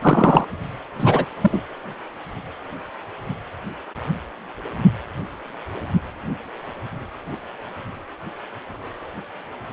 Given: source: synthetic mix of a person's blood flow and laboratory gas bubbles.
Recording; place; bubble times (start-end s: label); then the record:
Doppler ultrasound of blood flow; precordium
0.01-0.44 s: bubbles
0.99-1.26 s: bubbles
1.41-1.62 s: bubbles
From the record:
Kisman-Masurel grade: 223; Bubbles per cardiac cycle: several, 3 to 8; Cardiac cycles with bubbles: 10 to 50%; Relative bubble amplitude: loud (0.450 to 0.775); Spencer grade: 2 (many but less than half of the cardiac periods contain bubble signals, singularly or in groups); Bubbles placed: anywhere in the cardiac cycle